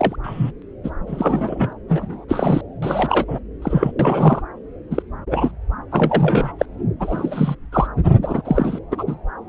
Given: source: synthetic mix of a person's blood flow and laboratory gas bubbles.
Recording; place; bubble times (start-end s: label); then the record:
Doppler ultrasound of blood flow; subclavian vein
0.00-0.16 s: bubbles
0.23-0.51 s: bubbles
0.83-0.90 s: bubbles
1.07-1.73 s: bubbles
1.88-2.25 s: bubbles
2.28-2.61 s: bubbles
2.82-3.25 s: bubbles
3.27-3.40 s: bubbles
3.61-3.92 s: bubbles
3.99-4.42 s: bubbles
4.91-5.02 s: bubbles
5.30-5.51 s: bubbles
5.91-6.52 s: bubbles
6.59-6.66 s: bubbles
7.00-7.55 s: bubbles
7.72-7.87 s: bubbles
8.22-8.42 s: bubbles
8.45-8.79 s: bubbles
8.91-9.04 s: bubbles
9.06-9.15 s: bubbles
From the record:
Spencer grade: 3 (all of the cardiac periods contain showers or single bubble signals, but not dominating or overriding the cardiac motion signals); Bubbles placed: anywhere in the cardiac cycle